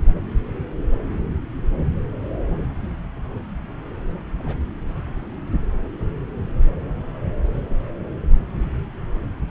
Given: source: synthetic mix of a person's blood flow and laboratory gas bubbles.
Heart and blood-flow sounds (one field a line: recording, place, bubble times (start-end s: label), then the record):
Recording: Doppler ultrasound of blood flow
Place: subclavian vein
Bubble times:
4.40-4.57 s: bubbles
From the record:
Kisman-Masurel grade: 111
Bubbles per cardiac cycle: 1 to 2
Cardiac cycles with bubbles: 1 to 10%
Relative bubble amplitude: barely perceptible (0.100 to 0.250)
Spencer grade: 1 (occasional bubble signal discernible with the cardiac motion signal, with majority of cardiac periods free of bubbles)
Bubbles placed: anywhere in the cardiac cycle